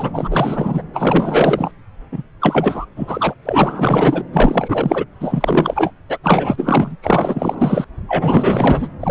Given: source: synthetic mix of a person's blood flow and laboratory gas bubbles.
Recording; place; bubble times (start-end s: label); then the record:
Doppler ultrasound of blood flow; subclavian vein
0.00-0.82 s: bubbles
0.93-1.71 s: bubbles
2.12-2.23 s: bubbles
2.41-2.85 s: bubbles
2.96-3.34 s: bubbles
3.45-4.22 s: bubbles
4.33-5.05 s: bubbles
5.20-5.91 s: bubbles
6.08-6.18 s: bubbles
6.23-6.96 s: bubbles
7.02-7.85 s: bubbles
8.08-8.88 s: bubbles
9.00-9.11 s: bubbles
From the record:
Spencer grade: 4 (maximum detectable bubble signal sounding continuously throughout systole and diastole of every cardiac period, and overriding the amplitude of the normal cardiac signals); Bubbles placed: anywhere in the cardiac cycle